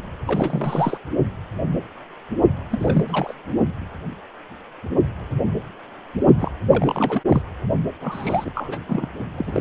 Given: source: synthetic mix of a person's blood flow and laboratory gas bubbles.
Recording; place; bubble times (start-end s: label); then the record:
Doppler ultrasound of blood flow; precordium
0.27-0.97 s: bubbles
2.70-3.05 s: bubbles
3.07-3.33 s: bubbles
6.39-6.52 s: bubbles
6.72-7.21 s: bubbles
7.29-7.42 s: bubbles
8.01-8.78 s: bubbles
8.87-9.11 s: bubbles
9.38-9.61 s: bubbles
From the record:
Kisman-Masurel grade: 332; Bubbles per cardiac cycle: rolling drumbeat, 9 or more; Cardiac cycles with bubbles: 50 to 99%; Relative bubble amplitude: moderate (0.250 to 0.450); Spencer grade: 3 (all of the cardiac periods contain showers or single bubble signals, but not dominating or overriding the cardiac motion signals); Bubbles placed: only in the low amplitude regions of the cardiac cycle